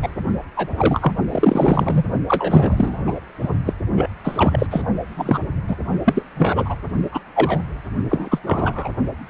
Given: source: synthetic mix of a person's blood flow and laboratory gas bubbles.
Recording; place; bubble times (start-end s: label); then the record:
Doppler ultrasound of blood flow; precordium
0.03-0.09 s: bubbles
0.55-0.68 s: bubbles
0.77-1.13 s: bubbles
1.29-2.04 s: bubbles
2.27-3.20 s: bubbles
3.42-3.49 s: bubbles
3.66-3.73 s: bubbles
3.92-4.08 s: bubbles
4.24-4.67 s: bubbles
4.70-4.84 s: bubbles
5.17-5.39 s: bubbles
5.67-5.76 s: bubbles
6.05-6.23 s: bubbles
6.36-6.75 s: bubbles
7.12-7.20 s: bubbles
7.34-7.59 s: bubbles
8.09-8.39 s: bubbles
8.46-8.89 s: bubbles
From the record:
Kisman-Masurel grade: 243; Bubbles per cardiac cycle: several, 3 to 8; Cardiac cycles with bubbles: 100%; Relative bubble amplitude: loud (0.450 to 0.775); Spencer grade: 3 (all of the cardiac periods contain showers or single bubble signals, but not dominating or overriding the cardiac motion signals); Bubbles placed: only in the low amplitude regions of the cardiac cycle